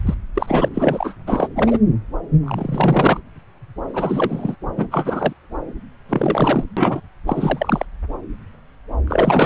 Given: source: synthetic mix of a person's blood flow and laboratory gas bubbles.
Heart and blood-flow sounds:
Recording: Doppler ultrasound of blood flow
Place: subclavian vein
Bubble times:
0.05-0.15 s: bubbles
0.34-0.69 s: bubbles
0.73-1.15 s: bubbles
1.26-1.48 s: bubbles
1.55-1.78 s: bubbles
2.46-3.21 s: bubbles
3.93-4.56 s: bubbles
4.77-4.88 s: bubbles
4.91-5.33 s: bubbles
6.09-6.64 s: bubbles
6.76-7.01 s: bubbles
7.26-7.86 s: bubbles
9.07-9.46 s: bubbles
From the record:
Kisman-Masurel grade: 333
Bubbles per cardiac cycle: rolling drumbeat, 9 or more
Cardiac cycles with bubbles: 50 to 99%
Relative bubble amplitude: loud (0.450 to 0.775)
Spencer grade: 3 (all of the cardiac periods contain showers or single bubble signals, but not dominating or overriding the cardiac motion signals)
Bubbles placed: anywhere in the cardiac cycle

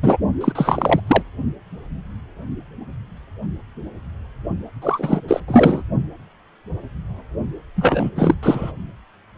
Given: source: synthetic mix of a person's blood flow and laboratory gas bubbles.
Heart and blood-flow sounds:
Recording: Doppler ultrasound of blood flow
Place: precordium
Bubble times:
0.02-0.17 s: bubbles
0.40-0.52 s: bubbles
0.55-1.00 s: bubbles
1.07-1.23 s: bubbles
4.81-5.21 s: bubbles
5.27-5.40 s: bubbles
5.47-5.82 s: bubbles
7.76-8.10 s: bubbles
8.15-8.34 s: bubbles
8.42-8.72 s: bubbles
From the record:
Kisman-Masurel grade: 333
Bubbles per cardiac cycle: rolling drumbeat, 9 or more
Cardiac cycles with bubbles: 50 to 99%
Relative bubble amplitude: loud (0.450 to 0.775)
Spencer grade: 3 (all of the cardiac periods contain showers or single bubble signals, but not dominating or overriding the cardiac motion signals)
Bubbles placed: only in the low amplitude regions of the cardiac cycle

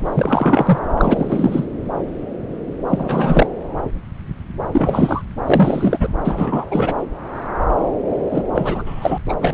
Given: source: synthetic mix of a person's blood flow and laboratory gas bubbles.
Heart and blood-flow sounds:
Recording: Doppler ultrasound of blood flow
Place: subclavian vein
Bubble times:
0.07-0.79 s: bubbles
0.97-1.65 s: bubbles
2.90-3.46 s: bubbles
4.71-5.23 s: bubbles
5.45-6.08 s: bubbles
6.24-6.65 s: bubbles
6.70-6.95 s: bubbles
8.32-8.43 s: bubbles
8.54-9.19 s: bubbles
9.29-9.34 s: bubbles
9.41-9.54 s: bubbles
From the record:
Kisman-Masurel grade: 333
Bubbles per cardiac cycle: rolling drumbeat, 9 or more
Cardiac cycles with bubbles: 50 to 99%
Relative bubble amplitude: loud (0.450 to 0.775)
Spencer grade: 3 (all of the cardiac periods contain showers or single bubble signals, but not dominating or overriding the cardiac motion signals)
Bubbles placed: anywhere in the cardiac cycle

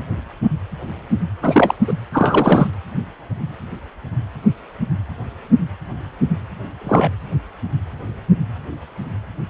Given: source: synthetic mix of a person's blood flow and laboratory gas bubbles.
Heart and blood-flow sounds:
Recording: Doppler ultrasound of blood flow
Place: precordium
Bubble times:
1.43-1.75 s: bubbles
1.87-1.93 s: bubbles
2.12-2.67 s: bubbles
6.79-7.09 s: bubbles
From the record:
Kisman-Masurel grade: 223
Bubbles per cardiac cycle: several, 3 to 8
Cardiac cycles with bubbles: 10 to 50%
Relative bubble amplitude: loud (0.450 to 0.775)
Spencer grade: 2 (many but less than half of the cardiac periods contain bubble signals, singularly or in groups)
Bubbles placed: anywhere in the cardiac cycle

